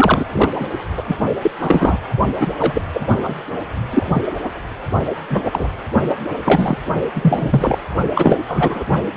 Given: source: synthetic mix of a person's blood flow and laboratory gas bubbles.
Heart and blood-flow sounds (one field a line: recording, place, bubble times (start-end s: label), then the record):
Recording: Doppler ultrasound of blood flow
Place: precordium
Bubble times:
0.00-0.24 s: bubbles
0.32-0.52 s: bubbles
0.59-0.67 s: bubbles
0.96-1.04 s: bubbles
1.08-1.17 s: bubbles
1.42-1.51 s: bubbles
1.60-1.97 s: bubbles
2.40-2.52 s: bubbles
2.58-2.81 s: bubbles
2.94-3.01 s: bubbles
3.16-3.35 s: bubbles
3.90-4.22 s: bubbles
4.43-4.49 s: bubbles
5.30-5.41 s: bubbles
5.44-5.69 s: bubbles
6.44-6.77 s: bubbles
7.14-7.76 s: bubbles
8.14-8.40 s: bubbles
8.48-8.84 s: bubbles
From the record:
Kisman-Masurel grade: 243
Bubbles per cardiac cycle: several, 3 to 8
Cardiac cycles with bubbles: 100%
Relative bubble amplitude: loud (0.450 to 0.775)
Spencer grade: 3 (all of the cardiac periods contain showers or single bubble signals, but not dominating or overriding the cardiac motion signals)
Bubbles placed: only in the low amplitude regions of the cardiac cycle